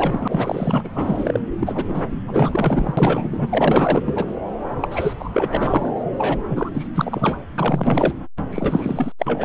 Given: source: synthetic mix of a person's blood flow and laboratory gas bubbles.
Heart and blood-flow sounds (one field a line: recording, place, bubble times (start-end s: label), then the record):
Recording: Doppler ultrasound of blood flow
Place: subclavian vein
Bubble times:
0.00-0.90 s: bubbles
0.95-1.40 s: bubbles
1.59-2.07 s: bubbles
2.11-2.17 s: bubbles
2.27-4.26 s: bubbles
4.80-5.14 s: bubbles
5.19-5.30 s: bubbles
5.33-5.92 s: bubbles
6.17-6.38 s: bubbles
6.48-6.71 s: bubbles
6.73-6.88 s: bubbles
6.94-7.35 s: bubbles
7.58-8.13 s: bubbles
8.51-9.12 s: bubbles
9.19-9.45 s: bubbles
From the record:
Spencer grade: 4 (maximum detectable bubble signal sounding continuously throughout systole and diastole of every cardiac period, and overriding the amplitude of the normal cardiac signals)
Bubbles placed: anywhere in the cardiac cycle